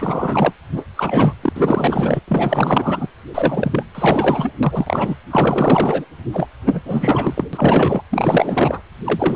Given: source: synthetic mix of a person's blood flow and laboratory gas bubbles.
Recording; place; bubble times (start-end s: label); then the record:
Doppler ultrasound of blood flow; precordium
0.00-0.53 s: bubbles
0.71-0.85 s: bubbles
0.97-1.34 s: bubbles
1.43-2.20 s: bubbles
2.27-3.08 s: bubbles
3.34-3.83 s: bubbles
3.94-4.52 s: bubbles
4.62-5.16 s: bubbles
5.30-6.05 s: bubbles
6.32-6.47 s: bubbles
6.66-6.80 s: bubbles
6.85-7.45 s: bubbles
7.53-8.02 s: bubbles
8.11-8.80 s: bubbles
9.04-9.36 s: bubbles
From the record:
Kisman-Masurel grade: 444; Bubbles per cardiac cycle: continuous sound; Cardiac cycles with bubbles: 100%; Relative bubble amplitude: maximal (0.775 to 0.999); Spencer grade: 4 (maximum detectable bubble signal sounding continuously throughout systole and diastole of every cardiac period, and overriding the amplitude of the normal cardiac signals); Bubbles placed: anywhere in the cardiac cycle